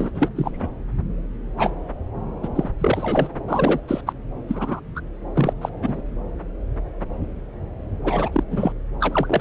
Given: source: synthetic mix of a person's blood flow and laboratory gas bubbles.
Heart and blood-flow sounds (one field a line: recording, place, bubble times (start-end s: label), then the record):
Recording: Doppler ultrasound of blood flow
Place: subclavian vein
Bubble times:
0.00-0.10 s: bubbles
0.15-0.29 s: bubbles
0.36-0.50 s: bubbles
0.53-0.69 s: bubbles
1.58-1.70 s: bubbles
2.43-2.48 s: bubbles
2.55-2.69 s: bubbles
2.80-3.28 s: bubbles
3.48-3.80 s: bubbles
3.88-4.01 s: bubbles
4.06-4.12 s: bubbles
4.48-4.80 s: bubbles
4.95-5.00 s: bubbles
5.35-5.53 s: bubbles
5.61-5.69 s: bubbles
5.81-6.01 s: bubbles
8.04-8.44 s: bubbles
8.50-8.72 s: bubbles
9.00-9.41 s: bubbles
From the record:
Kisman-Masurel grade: 232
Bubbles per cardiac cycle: several, 3 to 8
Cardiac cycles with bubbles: 50 to 99%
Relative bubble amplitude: moderate (0.250 to 0.450)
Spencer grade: 3 (all of the cardiac periods contain showers or single bubble signals, but not dominating or overriding the cardiac motion signals)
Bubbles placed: anywhere in the cardiac cycle